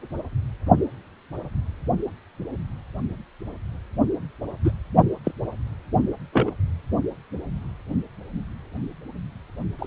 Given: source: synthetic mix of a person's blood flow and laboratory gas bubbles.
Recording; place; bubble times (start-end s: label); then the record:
Doppler ultrasound of blood flow; precordium
4.64-4.71 s: bubbles
5.25-5.32 s: bubbles
6.33-6.51 s: bubbles
9.79-9.87 s: bubbles
From the record:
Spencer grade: 2 (many but less than half of the cardiac periods contain bubble signals, singularly or in groups); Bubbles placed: only in the low amplitude regions of the cardiac cycle